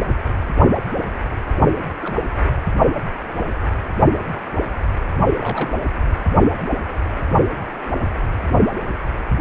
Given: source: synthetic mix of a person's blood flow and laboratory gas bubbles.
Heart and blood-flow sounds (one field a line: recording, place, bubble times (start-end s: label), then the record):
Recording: Doppler ultrasound of blood flow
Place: precordium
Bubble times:
2.02-2.14 s: bubbles
5.38-5.80 s: bubbles
From the record:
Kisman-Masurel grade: 121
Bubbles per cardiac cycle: 1 to 2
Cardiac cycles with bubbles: 10 to 50%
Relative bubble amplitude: barely perceptible (0.100 to 0.250)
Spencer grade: 2 (many but less than half of the cardiac periods contain bubble signals, singularly or in groups)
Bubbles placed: only in the low amplitude regions of the cardiac cycle